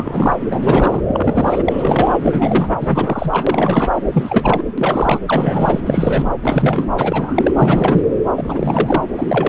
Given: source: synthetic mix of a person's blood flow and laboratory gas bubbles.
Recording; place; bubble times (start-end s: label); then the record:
Doppler ultrasound of blood flow; subclavian vein
0.00-0.37 s: bubbles
0.49-1.02 s: bubbles
1.07-1.62 s: bubbles
1.66-2.70 s: bubbles
2.80-3.91 s: bubbles
4.12-4.63 s: bubbles
4.78-5.19 s: bubbles
5.27-5.81 s: bubbles
5.84-6.33 s: bubbles
6.43-6.92 s: bubbles
6.97-7.52 s: bubbles
7.57-8.02 s: bubbles
8.35-9.04 s: bubbles
9.17-9.49 s: bubbles
From the record:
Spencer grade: 3 (all of the cardiac periods contain showers or single bubble signals, but not dominating or overriding the cardiac motion signals); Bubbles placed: anywhere in the cardiac cycle